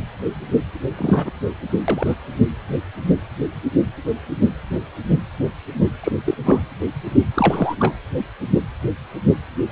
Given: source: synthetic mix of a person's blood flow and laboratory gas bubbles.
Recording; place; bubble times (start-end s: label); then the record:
Doppler ultrasound of blood flow; precordium
0.97-1.31 s: bubbles
1.88-2.16 s: bubbles
6.03-6.12 s: bubbles
6.25-6.35 s: bubbles
6.45-6.65 s: bubbles
7.34-7.75 s: bubbles
7.79-7.94 s: bubbles
From the record:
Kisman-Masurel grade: 222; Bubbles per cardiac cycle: several, 3 to 8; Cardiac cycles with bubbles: 10 to 50%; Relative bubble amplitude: moderate (0.250 to 0.450); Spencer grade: 2 (many but less than half of the cardiac periods contain bubble signals, singularly or in groups); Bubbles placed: anywhere in the cardiac cycle